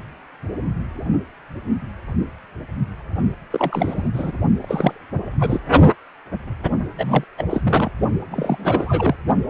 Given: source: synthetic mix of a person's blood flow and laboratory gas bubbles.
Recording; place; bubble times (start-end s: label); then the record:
Doppler ultrasound of blood flow; precordium
3.51-4.08 s: bubbles
4.14-4.33 s: bubbles
4.61-4.99 s: bubbles
5.12-5.20 s: bubbles
5.38-5.61 s: bubbles
6.98-7.24 s: bubbles
7.38-7.45 s: bubbles
7.50-7.61 s: bubbles
7.63-7.92 s: bubbles
8.31-9.15 s: bubbles
9.47-9.50 s: bubbles
From the record:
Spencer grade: 3 (all of the cardiac periods contain showers or single bubble signals, but not dominating or overriding the cardiac motion signals); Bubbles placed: only in the low amplitude regions of the cardiac cycle